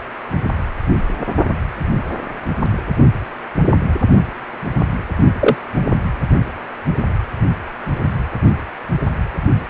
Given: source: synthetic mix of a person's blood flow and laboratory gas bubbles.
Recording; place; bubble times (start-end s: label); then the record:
Doppler ultrasound of blood flow; precordium
5.40-5.56 s: bubbles
From the record:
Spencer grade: 1 (occasional bubble signal discernible with the cardiac motion signal, with majority of cardiac periods free of bubbles); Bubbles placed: anywhere in the cardiac cycle